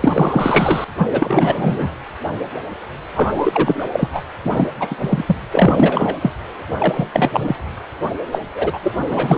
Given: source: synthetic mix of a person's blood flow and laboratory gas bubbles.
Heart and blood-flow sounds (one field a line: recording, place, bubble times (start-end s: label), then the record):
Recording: Doppler ultrasound of blood flow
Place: precordium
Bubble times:
0.01-0.84 s: bubbles
0.98-1.89 s: bubbles
3.15-3.88 s: bubbles
3.92-4.09 s: bubbles
4.12-4.22 s: bubbles
4.44-4.67 s: bubbles
4.79-4.96 s: bubbles
5.01-5.36 s: bubbles
5.50-6.15 s: bubbles
6.21-6.32 s: bubbles
6.67-7.08 s: bubbles
7.12-7.55 s: bubbles
8.32-8.41 s: bubbles
8.54-8.79 s: bubbles
8.83-8.92 s: bubbles
9.09-9.38 s: bubbles
From the record:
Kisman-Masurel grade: 333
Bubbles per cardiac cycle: rolling drumbeat, 9 or more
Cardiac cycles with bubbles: 50 to 99%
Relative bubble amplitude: loud (0.450 to 0.775)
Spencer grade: 3 (all of the cardiac periods contain showers or single bubble signals, but not dominating or overriding the cardiac motion signals)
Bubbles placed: anywhere in the cardiac cycle